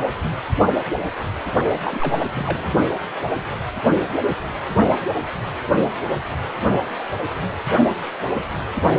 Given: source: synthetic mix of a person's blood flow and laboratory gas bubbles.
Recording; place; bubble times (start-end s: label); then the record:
Doppler ultrasound of blood flow; precordium
1.84-2.15 s: bubbles
2.32-2.70 s: bubbles
From the record:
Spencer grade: 2 (many but less than half of the cardiac periods contain bubble signals, singularly or in groups); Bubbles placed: only in the low amplitude regions of the cardiac cycle